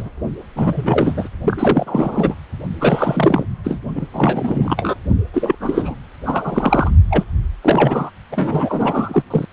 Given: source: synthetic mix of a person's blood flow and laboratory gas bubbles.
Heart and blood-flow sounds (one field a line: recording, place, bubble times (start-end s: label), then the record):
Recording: Doppler ultrasound of blood flow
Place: precordium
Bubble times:
0.00-0.09 s: bubbles
0.56-1.29 s: bubbles
1.42-2.35 s: bubbles
2.79-3.46 s: bubbles
3.64-3.79 s: bubbles
3.95-4.07 s: bubbles
4.13-4.95 s: bubbles
5.33-5.55 s: bubbles
5.60-5.96 s: bubbles
6.25-6.91 s: bubbles
7.10-7.25 s: bubbles
7.62-8.10 s: bubbles
8.32-9.23 s: bubbles
9.30-9.46 s: bubbles
From the record:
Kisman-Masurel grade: 343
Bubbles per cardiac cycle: rolling drumbeat, 9 or more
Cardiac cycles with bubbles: 100%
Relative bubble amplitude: loud (0.450 to 0.775)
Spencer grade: 3 (all of the cardiac periods contain showers or single bubble signals, but not dominating or overriding the cardiac motion signals)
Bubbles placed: only in the low amplitude regions of the cardiac cycle